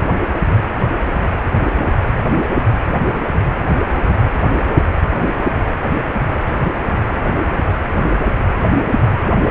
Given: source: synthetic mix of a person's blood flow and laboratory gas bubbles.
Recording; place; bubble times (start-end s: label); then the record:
Doppler ultrasound of blood flow; precordium
no bubbles
From the record:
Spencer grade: 0 (complete lack of bubble signals)